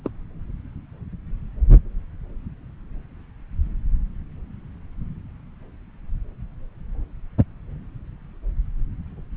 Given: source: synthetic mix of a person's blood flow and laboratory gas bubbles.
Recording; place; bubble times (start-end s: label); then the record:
Doppler ultrasound of blood flow; subclavian vein
0.04-0.10 s: bubbles
From the record:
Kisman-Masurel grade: 211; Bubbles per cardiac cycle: several, 3 to 8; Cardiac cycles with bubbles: 1 to 10%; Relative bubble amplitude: barely perceptible (0.100 to 0.250); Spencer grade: 1 (occasional bubble signal discernible with the cardiac motion signal, with majority of cardiac periods free of bubbles); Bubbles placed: anywhere in the cardiac cycle